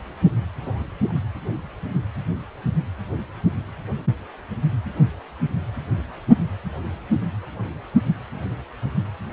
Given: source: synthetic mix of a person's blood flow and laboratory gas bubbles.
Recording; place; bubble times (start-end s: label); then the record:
Doppler ultrasound of blood flow; precordium
0.61-0.84 s: bubbles
1.08-1.13 s: bubbles
From the record:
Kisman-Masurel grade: 211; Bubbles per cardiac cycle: several, 3 to 8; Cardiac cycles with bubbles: 1 to 10%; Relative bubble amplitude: barely perceptible (0.100 to 0.250); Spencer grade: 1 (occasional bubble signal discernible with the cardiac motion signal, with majority of cardiac periods free of bubbles); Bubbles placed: anywhere in the cardiac cycle